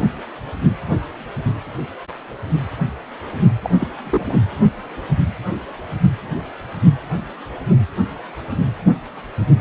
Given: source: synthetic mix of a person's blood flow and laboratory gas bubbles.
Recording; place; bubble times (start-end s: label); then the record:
Doppler ultrasound of blood flow; precordium
3.63-3.70 s: bubbles
3.74-3.88 s: bubbles
4.04-4.38 s: bubbles
From the record:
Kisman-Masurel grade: 212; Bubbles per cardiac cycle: several, 3 to 8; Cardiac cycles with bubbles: 1 to 10%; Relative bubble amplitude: moderate (0.250 to 0.450); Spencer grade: 1 (occasional bubble signal discernible with the cardiac motion signal, with majority of cardiac periods free of bubbles); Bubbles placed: anywhere in the cardiac cycle